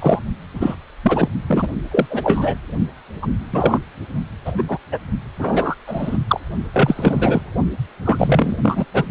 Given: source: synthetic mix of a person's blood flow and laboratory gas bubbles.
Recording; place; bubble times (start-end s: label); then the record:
Doppler ultrasound of blood flow; precordium
0.00-0.22 s: bubbles
0.54-0.75 s: bubbles
1.03-1.28 s: bubbles
1.47-1.67 s: bubbles
1.91-2.06 s: bubbles
2.09-2.56 s: bubbles
3.22-3.26 s: bubbles
3.52-3.79 s: bubbles
4.45-4.52 s: bubbles
4.58-4.63 s: bubbles
4.68-4.79 s: bubbles
4.92-4.98 s: bubbles
5.38-5.75 s: bubbles
5.87-6.17 s: bubbles
6.27-6.40 s: bubbles
6.73-7.47 s: bubbles
8.05-8.56 s: bubbles
8.62-8.85 s: bubbles
8.94-9.04 s: bubbles
From the record:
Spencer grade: 3 (all of the cardiac periods contain showers or single bubble signals, but not dominating or overriding the cardiac motion signals); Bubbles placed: only in the low amplitude regions of the cardiac cycle